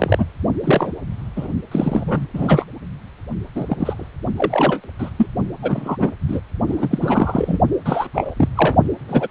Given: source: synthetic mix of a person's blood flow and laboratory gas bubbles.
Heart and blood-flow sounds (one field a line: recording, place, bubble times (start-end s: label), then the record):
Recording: Doppler ultrasound of blood flow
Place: precordium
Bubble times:
0.00-0.26 s: bubbles
0.64-0.92 s: bubbles
1.36-1.48 s: bubbles
1.71-2.27 s: bubbles
2.33-2.65 s: bubbles
3.55-4.07 s: bubbles
4.36-4.80 s: bubbles
4.99-5.10 s: bubbles
5.17-5.26 s: bubbles
5.62-5.97 s: bubbles
6.00-6.11 s: bubbles
6.27-6.40 s: bubbles
6.67-6.98 s: bubbles
7.01-7.58 s: bubbles
7.85-8.07 s: bubbles
8.13-8.34 s: bubbles
8.37-8.49 s: bubbles
8.55-8.76 s: bubbles
9.08-9.28 s: bubbles
From the record:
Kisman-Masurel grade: 242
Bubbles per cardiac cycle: several, 3 to 8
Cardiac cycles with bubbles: 100%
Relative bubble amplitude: moderate (0.250 to 0.450)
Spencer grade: 3 (all of the cardiac periods contain showers or single bubble signals, but not dominating or overriding the cardiac motion signals)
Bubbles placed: only in the low amplitude regions of the cardiac cycle